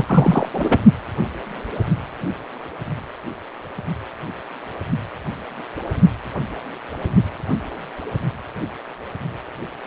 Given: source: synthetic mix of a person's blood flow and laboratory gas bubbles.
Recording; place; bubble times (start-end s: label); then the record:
Doppler ultrasound of blood flow; precordium
0.00-0.49 s: bubbles
0.53-0.80 s: bubbles
From the record:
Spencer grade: 1 (occasional bubble signal discernible with the cardiac motion signal, with majority of cardiac periods free of bubbles); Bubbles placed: only in the low amplitude regions of the cardiac cycle